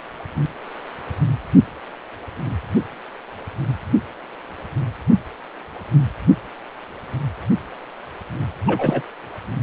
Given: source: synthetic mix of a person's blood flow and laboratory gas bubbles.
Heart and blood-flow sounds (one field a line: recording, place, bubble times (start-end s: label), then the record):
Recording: Doppler ultrasound of blood flow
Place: precordium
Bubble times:
8.67-9.03 s: bubbles
From the record:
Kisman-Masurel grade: 113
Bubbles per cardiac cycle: 1 to 2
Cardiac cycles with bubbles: 1 to 10%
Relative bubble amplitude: loud (0.450 to 0.775)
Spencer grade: 1 (occasional bubble signal discernible with the cardiac motion signal, with majority of cardiac periods free of bubbles)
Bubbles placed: anywhere in the cardiac cycle